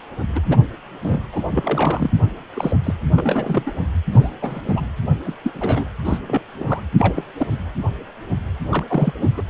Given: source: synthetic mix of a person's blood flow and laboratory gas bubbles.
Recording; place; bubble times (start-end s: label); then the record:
Doppler ultrasound of blood flow; precordium
0.35-0.41 s: bubbles
0.44-0.65 s: bubbles
1.01-1.23 s: bubbles
1.31-1.42 s: bubbles
1.51-2.10 s: bubbles
2.53-2.76 s: bubbles
2.83-2.94 s: bubbles
3.15-3.71 s: bubbles
4.12-4.30 s: bubbles
4.41-4.62 s: bubbles
4.65-4.87 s: bubbles
5.25-5.35 s: bubbles
5.43-5.51 s: bubbles
5.54-5.85 s: bubbles
6.04-6.17 s: bubbles
6.27-6.42 s: bubbles
6.59-6.82 s: bubbles
6.96-7.25 s: bubbles
7.37-7.47 s: bubbles
7.50-7.58 s: bubbles
8.71-8.84 s: bubbles
8.88-9.12 s: bubbles
9.21-9.30 s: bubbles
9.37-9.42 s: bubbles
From the record:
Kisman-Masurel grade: 232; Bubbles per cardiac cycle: several, 3 to 8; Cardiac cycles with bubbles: 50 to 99%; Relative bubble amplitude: moderate (0.250 to 0.450); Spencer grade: 3 (all of the cardiac periods contain showers or single bubble signals, but not dominating or overriding the cardiac motion signals); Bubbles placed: anywhere in the cardiac cycle